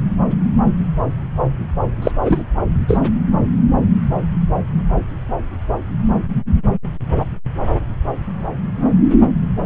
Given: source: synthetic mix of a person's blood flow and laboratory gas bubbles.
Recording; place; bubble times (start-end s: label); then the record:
Doppler ultrasound of blood flow; subclavian vein
2.02-2.11 s: bubbles
2.21-2.42 s: bubbles
2.88-2.98 s: bubbles
From the record:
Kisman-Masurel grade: 213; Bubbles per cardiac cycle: several, 3 to 8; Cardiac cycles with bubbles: 1 to 10%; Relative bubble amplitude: loud (0.450 to 0.775); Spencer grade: 1 (occasional bubble signal discernible with the cardiac motion signal, with majority of cardiac periods free of bubbles); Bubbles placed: anywhere in the cardiac cycle